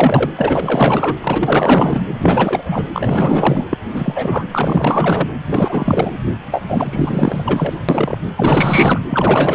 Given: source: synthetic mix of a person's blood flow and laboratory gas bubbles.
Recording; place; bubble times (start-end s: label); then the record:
Doppler ultrasound of blood flow; precordium
0.00-0.31 s: bubbles
0.36-1.17 s: bubbles
1.21-2.03 s: bubbles
2.07-2.85 s: bubbles
2.94-3.65 s: bubbles
3.69-3.77 s: bubbles
3.89-4.45 s: bubbles
4.51-5.29 s: bubbles
5.47-6.18 s: bubbles
6.51-6.62 s: bubbles
6.68-7.78 s: bubbles
7.89-8.18 s: bubbles
8.35-9.00 s: bubbles
9.09-9.55 s: bubbles
From the record:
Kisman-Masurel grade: 444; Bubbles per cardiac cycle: continuous sound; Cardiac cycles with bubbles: 100%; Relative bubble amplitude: maximal (0.775 to 0.999); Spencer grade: 4 (maximum detectable bubble signal sounding continuously throughout systole and diastole of every cardiac period, and overriding the amplitude of the normal cardiac signals); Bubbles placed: anywhere in the cardiac cycle